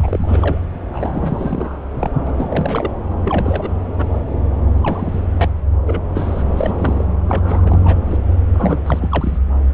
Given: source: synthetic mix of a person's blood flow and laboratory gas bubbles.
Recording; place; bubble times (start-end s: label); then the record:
Doppler ultrasound of blood flow; subclavian vein
0.00-0.61 s: bubbles
0.93-1.85 s: bubbles
1.94-2.09 s: bubbles
2.27-2.90 s: bubbles
3.25-3.71 s: bubbles
3.96-4.12 s: bubbles
4.83-5.21 s: bubbles
5.33-5.47 s: bubbles
5.85-6.01 s: bubbles
6.14-6.43 s: bubbles
6.57-6.75 s: bubbles
6.78-7.04 s: bubbles
7.27-7.97 s: bubbles
8.10-8.18 s: bubbles
8.54-8.79 s: bubbles
8.86-9.38 s: bubbles
From the record:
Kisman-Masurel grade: 332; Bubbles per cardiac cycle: rolling drumbeat, 9 or more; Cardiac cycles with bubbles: 50 to 99%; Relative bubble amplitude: moderate (0.250 to 0.450); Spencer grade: 3 (all of the cardiac periods contain showers or single bubble signals, but not dominating or overriding the cardiac motion signals); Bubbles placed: anywhere in the cardiac cycle